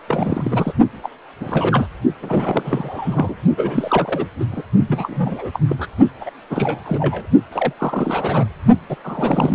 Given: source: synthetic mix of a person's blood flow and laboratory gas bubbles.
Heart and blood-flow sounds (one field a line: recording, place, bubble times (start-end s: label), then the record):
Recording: Doppler ultrasound of blood flow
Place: precordium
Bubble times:
0.08-0.73 s: bubbles
1.03-1.09 s: bubbles
1.40-1.90 s: bubbles
2.22-3.34 s: bubbles
3.57-4.27 s: bubbles
4.39-4.45 s: bubbles
4.51-4.63 s: bubbles
4.88-5.50 s: bubbles
5.53-5.59 s: bubbles
5.68-5.75 s: bubbles
5.78-5.87 s: bubbles
6.21-6.30 s: bubbles
6.50-7.28 s: bubbles
7.51-7.73 s: bubbles
7.78-8.47 s: bubbles
8.88-8.96 s: bubbles
9.04-9.55 s: bubbles
From the record:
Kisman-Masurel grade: 342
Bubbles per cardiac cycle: rolling drumbeat, 9 or more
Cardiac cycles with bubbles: 100%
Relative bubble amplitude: moderate (0.250 to 0.450)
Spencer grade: 3 (all of the cardiac periods contain showers or single bubble signals, but not dominating or overriding the cardiac motion signals)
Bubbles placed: only in the low amplitude regions of the cardiac cycle